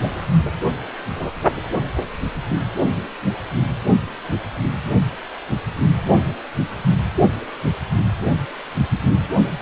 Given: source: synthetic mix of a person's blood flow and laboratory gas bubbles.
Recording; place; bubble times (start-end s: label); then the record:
Doppler ultrasound of blood flow; precordium
0.46-0.50 s: bubbles
From the record:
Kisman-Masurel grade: 112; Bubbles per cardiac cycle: 1 to 2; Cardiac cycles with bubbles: 1 to 10%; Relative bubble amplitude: moderate (0.250 to 0.450); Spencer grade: 1 (occasional bubble signal discernible with the cardiac motion signal, with majority of cardiac periods free of bubbles); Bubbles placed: only in the low amplitude regions of the cardiac cycle